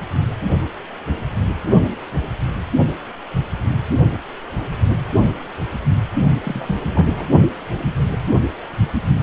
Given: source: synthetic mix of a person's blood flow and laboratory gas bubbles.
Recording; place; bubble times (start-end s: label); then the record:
Doppler ultrasound of blood flow; precordium
6.43-6.80 s: bubbles
6.93-7.26 s: bubbles
From the record:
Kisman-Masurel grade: 122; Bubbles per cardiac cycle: 1 to 2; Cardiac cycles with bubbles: 10 to 50%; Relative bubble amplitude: moderate (0.250 to 0.450); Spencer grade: 2 (many but less than half of the cardiac periods contain bubble signals, singularly or in groups); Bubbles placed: only in the low amplitude regions of the cardiac cycle